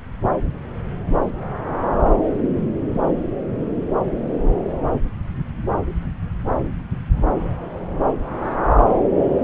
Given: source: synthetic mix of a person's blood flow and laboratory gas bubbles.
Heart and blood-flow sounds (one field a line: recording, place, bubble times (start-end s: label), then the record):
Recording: Doppler ultrasound of blood flow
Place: subclavian vein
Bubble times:
no bubbles
From the record:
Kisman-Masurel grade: 000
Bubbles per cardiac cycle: 0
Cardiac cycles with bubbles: 0%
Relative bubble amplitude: no bubbles discernible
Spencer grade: 0 (complete lack of bubble signals)